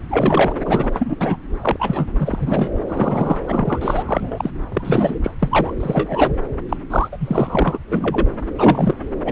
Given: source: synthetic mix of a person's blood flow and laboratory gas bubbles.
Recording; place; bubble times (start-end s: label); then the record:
Doppler ultrasound of blood flow; subclavian vein
0.09-0.54 s: bubbles
0.65-0.89 s: bubbles
0.92-1.16 s: bubbles
1.19-1.36 s: bubbles
1.61-1.76 s: bubbles
1.79-2.08 s: bubbles
2.19-2.69 s: bubbles
2.88-3.38 s: bubbles
3.46-4.03 s: bubbles
4.06-4.50 s: bubbles
4.69-5.20 s: bubbles
5.23-5.31 s: bubbles
5.39-5.75 s: bubbles
5.80-6.33 s: bubbles
6.69-6.77 s: bubbles
6.90-7.08 s: bubbles
7.12-7.17 s: bubbles
7.20-7.79 s: bubbles
7.89-8.26 s: bubbles
8.58-8.95 s: bubbles
9.24-9.32 s: bubbles
From the record:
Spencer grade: 3 (all of the cardiac periods contain showers or single bubble signals, but not dominating or overriding the cardiac motion signals); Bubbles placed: anywhere in the cardiac cycle